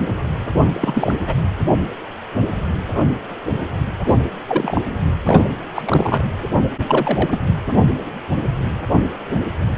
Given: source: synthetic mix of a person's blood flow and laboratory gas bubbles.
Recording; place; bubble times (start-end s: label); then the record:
Doppler ultrasound of blood flow; precordium
0.72-1.20 s: bubbles
1.26-1.34 s: bubbles
4.05-4.16 s: bubbles
4.47-4.81 s: bubbles
5.25-5.45 s: bubbles
5.75-5.82 s: bubbles
5.85-6.22 s: bubbles
6.87-7.40 s: bubbles
From the record:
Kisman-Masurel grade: 223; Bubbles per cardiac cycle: several, 3 to 8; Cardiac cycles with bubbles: 10 to 50%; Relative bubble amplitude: loud (0.450 to 0.775); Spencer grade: 2 (many but less than half of the cardiac periods contain bubble signals, singularly or in groups); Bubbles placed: anywhere in the cardiac cycle